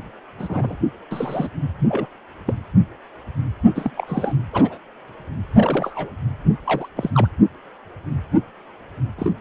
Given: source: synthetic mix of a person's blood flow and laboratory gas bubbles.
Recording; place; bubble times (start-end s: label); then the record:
Doppler ultrasound of blood flow; precordium
0.39-0.76 s: bubbles
1.11-1.49 s: bubbles
1.88-2.08 s: bubbles
2.46-2.54 s: bubbles
3.76-3.92 s: bubbles
3.97-4.33 s: bubbles
4.53-4.78 s: bubbles
5.49-6.12 s: bubbles
6.66-6.88 s: bubbles
6.96-7.28 s: bubbles
9.18-9.32 s: bubbles
From the record:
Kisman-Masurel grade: 232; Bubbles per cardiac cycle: several, 3 to 8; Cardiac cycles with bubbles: 50 to 99%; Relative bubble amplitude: moderate (0.250 to 0.450); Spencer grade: 3 (all of the cardiac periods contain showers or single bubble signals, but not dominating or overriding the cardiac motion signals); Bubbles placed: anywhere in the cardiac cycle